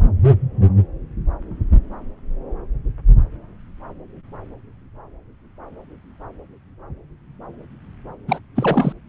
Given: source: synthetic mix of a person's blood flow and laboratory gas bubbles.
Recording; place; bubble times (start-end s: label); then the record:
Doppler ultrasound of blood flow; subclavian vein
8.28-8.39 s: bubbles
8.55-8.93 s: bubbles
From the record:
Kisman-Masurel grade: 212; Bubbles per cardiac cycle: several, 3 to 8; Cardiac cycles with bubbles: 1 to 10%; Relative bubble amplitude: moderate (0.250 to 0.450); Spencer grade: 1 (occasional bubble signal discernible with the cardiac motion signal, with majority of cardiac periods free of bubbles); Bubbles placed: anywhere in the cardiac cycle